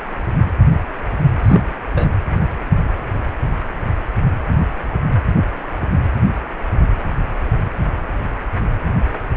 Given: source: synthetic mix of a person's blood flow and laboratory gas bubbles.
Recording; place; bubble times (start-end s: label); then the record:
Doppler ultrasound of blood flow; precordium
1.44-1.61 s: bubbles
1.93-2.10 s: bubbles
From the record:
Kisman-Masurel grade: 212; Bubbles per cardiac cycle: several, 3 to 8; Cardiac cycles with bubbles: 1 to 10%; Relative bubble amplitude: moderate (0.250 to 0.450); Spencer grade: 1 (occasional bubble signal discernible with the cardiac motion signal, with majority of cardiac periods free of bubbles); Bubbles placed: anywhere in the cardiac cycle